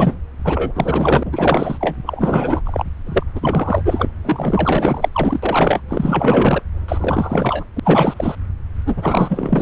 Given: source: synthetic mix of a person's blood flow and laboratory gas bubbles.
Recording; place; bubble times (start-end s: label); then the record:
Doppler ultrasound of blood flow; subclavian vein
0.00-0.17 s: bubbles
0.44-1.96 s: bubbles
2.06-2.61 s: bubbles
2.64-2.84 s: bubbles
3.06-3.23 s: bubbles
3.35-4.11 s: bubbles
4.24-5.09 s: bubbles
5.12-5.40 s: bubbles
5.42-5.81 s: bubbles
5.88-6.62 s: bubbles
6.88-7.65 s: bubbles
7.75-7.80 s: bubbles
7.83-8.14 s: bubbles
8.16-8.36 s: bubbles
8.85-9.62 s: bubbles
From the record:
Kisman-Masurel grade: 444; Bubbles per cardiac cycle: continuous sound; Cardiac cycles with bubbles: 100%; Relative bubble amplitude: maximal (0.775 to 0.999); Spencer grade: 4 (maximum detectable bubble signal sounding continuously throughout systole and diastole of every cardiac period, and overriding the amplitude of the normal cardiac signals); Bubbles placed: anywhere in the cardiac cycle